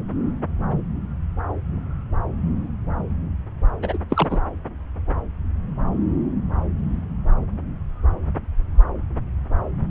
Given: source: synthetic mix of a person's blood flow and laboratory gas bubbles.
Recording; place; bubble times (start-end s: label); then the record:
Doppler ultrasound of blood flow; subclavian vein
3.82-3.98 s: bubbles
4.10-4.40 s: bubbles
From the record:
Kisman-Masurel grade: 212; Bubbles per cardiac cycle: several, 3 to 8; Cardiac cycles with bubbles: 1 to 10%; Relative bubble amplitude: moderate (0.250 to 0.450); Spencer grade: 1 (occasional bubble signal discernible with the cardiac motion signal, with majority of cardiac periods free of bubbles); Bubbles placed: anywhere in the cardiac cycle